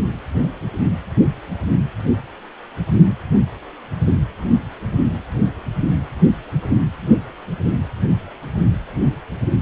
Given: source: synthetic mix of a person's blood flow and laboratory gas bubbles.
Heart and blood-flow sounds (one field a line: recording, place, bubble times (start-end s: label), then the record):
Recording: Doppler ultrasound of blood flow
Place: precordium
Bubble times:
no bubbles
From the record:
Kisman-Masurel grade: 000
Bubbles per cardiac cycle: 0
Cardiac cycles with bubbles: 0%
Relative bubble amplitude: no bubbles discernible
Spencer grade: 0 (complete lack of bubble signals)